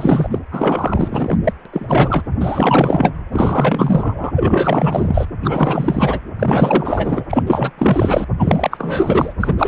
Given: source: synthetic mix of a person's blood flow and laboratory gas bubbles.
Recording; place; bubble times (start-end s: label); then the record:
Doppler ultrasound of blood flow; precordium
0.00-0.39 s: bubbles
0.51-1.39 s: bubbles
1.44-1.52 s: bubbles
1.65-1.69 s: bubbles
1.73-2.23 s: bubbles
2.40-3.12 s: bubbles
3.31-4.32 s: bubbles
4.36-5.26 s: bubbles
5.41-6.21 s: bubbles
6.39-7.25 s: bubbles
7.29-7.44 s: bubbles
7.46-7.71 s: bubbles
7.78-8.26 s: bubbles
8.39-9.34 s: bubbles
9.39-9.54 s: bubbles
9.58-9.68 s: bubbles
From the record:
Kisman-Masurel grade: 444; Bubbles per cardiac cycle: continuous sound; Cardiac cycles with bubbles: 100%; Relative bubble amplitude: maximal (0.775 to 0.999); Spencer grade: 4 (maximum detectable bubble signal sounding continuously throughout systole and diastole of every cardiac period, and overriding the amplitude of the normal cardiac signals); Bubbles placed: anywhere in the cardiac cycle